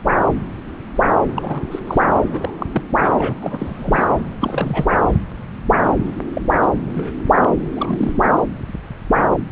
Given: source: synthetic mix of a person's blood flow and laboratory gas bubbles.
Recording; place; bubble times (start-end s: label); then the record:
Doppler ultrasound of blood flow; subclavian vein
1.35-1.62 s: bubbles
1.71-1.79 s: bubbles
1.87-2.03 s: bubbles
2.33-2.50 s: bubbles
2.58-2.66 s: bubbles
2.72-2.82 s: bubbles
3.03-3.10 s: bubbles
3.12-3.33 s: bubbles
3.42-4.06 s: bubbles
4.40-4.88 s: bubbles
6.34-6.41 s: bubbles
6.62-6.67 s: bubbles
6.94-7.11 s: bubbles
7.41-7.52 s: bubbles
7.74-8.13 s: bubbles
From the record:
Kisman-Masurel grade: 232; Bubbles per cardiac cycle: several, 3 to 8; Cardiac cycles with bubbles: 50 to 99%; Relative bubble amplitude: moderate (0.250 to 0.450); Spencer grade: 3 (all of the cardiac periods contain showers or single bubble signals, but not dominating or overriding the cardiac motion signals); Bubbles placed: anywhere in the cardiac cycle